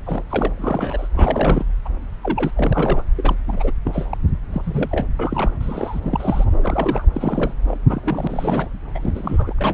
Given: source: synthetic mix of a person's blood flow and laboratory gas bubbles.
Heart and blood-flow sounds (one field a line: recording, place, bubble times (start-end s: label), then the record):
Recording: Doppler ultrasound of blood flow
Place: subclavian vein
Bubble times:
0.06-0.22 s: bubbles
0.30-0.51 s: bubbles
0.56-1.07 s: bubbles
1.14-1.66 s: bubbles
1.85-1.89 s: bubbles
2.23-2.51 s: bubbles
2.56-3.04 s: bubbles
3.18-3.34 s: bubbles
3.47-3.71 s: bubbles
3.85-4.17 s: bubbles
4.52-5.07 s: bubbles
5.19-5.50 s: bubbles
5.60-6.45 s: bubbles
6.61-7.07 s: bubbles
7.12-7.54 s: bubbles
7.67-7.77 s: bubbles
7.87-8.69 s: bubbles
8.94-9.53 s: bubbles
9.58-9.74 s: bubbles
From the record:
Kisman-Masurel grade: 242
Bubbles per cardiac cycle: several, 3 to 8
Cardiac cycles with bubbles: 100%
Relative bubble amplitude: moderate (0.250 to 0.450)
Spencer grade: 3 (all of the cardiac periods contain showers or single bubble signals, but not dominating or overriding the cardiac motion signals)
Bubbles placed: anywhere in the cardiac cycle